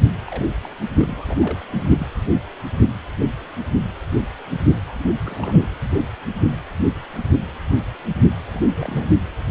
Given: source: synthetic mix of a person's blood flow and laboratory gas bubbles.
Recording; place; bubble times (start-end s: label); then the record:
Doppler ultrasound of blood flow; precordium
0.26-0.47 s: bubbles
0.61-0.69 s: bubbles
0.97-1.25 s: bubbles
1.28-1.65 s: bubbles
1.78-2.08 s: bubbles
4.88-4.93 s: bubbles
4.98-5.08 s: bubbles
5.25-5.69 s: bubbles
8.53-8.60 s: bubbles
8.74-9.16 s: bubbles
From the record:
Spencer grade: 2 (many but less than half of the cardiac periods contain bubble signals, singularly or in groups); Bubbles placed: anywhere in the cardiac cycle